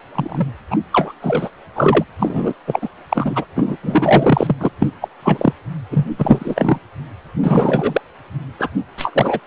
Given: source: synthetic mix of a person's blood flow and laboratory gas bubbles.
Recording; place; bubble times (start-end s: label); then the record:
Doppler ultrasound of blood flow; precordium
0.15-0.48 s: bubbles
0.70-0.77 s: bubbles
0.92-1.12 s: bubbles
1.21-1.49 s: bubbles
1.75-2.05 s: bubbles
2.19-2.54 s: bubbles
2.67-2.79 s: bubbles
2.82-2.89 s: bubbles
3.09-3.46 s: bubbles
3.56-3.77 s: bubbles
3.83-4.55 s: bubbles
4.59-4.71 s: bubbles
4.80-4.91 s: bubbles
5.01-5.08 s: bubbles
5.23-5.53 s: bubbles
5.90-6.07 s: bubbles
6.18-6.79 s: bubbles
7.44-8.01 s: bubbles
8.59-8.70 s: bubbles
8.97-9.39 s: bubbles
From the record:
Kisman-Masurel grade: 343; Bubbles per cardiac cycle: rolling drumbeat, 9 or more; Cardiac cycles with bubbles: 100%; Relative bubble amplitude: loud (0.450 to 0.775); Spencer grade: 3 (all of the cardiac periods contain showers or single bubble signals, but not dominating or overriding the cardiac motion signals); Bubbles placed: anywhere in the cardiac cycle